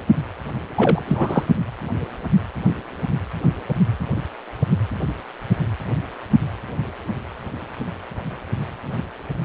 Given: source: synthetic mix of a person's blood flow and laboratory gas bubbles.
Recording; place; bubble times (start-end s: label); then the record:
Doppler ultrasound of blood flow; precordium
0.75-1.43 s: bubbles
From the record:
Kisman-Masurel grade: 212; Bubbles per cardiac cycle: several, 3 to 8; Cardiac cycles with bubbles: 1 to 10%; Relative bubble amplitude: moderate (0.250 to 0.450); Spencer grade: 1 (occasional bubble signal discernible with the cardiac motion signal, with majority of cardiac periods free of bubbles); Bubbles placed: anywhere in the cardiac cycle